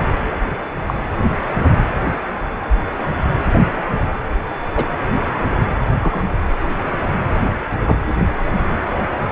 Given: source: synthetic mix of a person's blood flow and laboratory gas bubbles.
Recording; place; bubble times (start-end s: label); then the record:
Doppler ultrasound of blood flow; precordium
0.86-0.94 s: bubbles
4.75-4.85 s: bubbles
6.01-6.24 s: bubbles
7.86-7.99 s: bubbles
From the record:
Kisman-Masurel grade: 122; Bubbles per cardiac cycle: 1 to 2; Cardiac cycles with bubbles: 10 to 50%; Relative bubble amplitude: moderate (0.250 to 0.450); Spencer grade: 2 (many but less than half of the cardiac periods contain bubble signals, singularly or in groups); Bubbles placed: anywhere in the cardiac cycle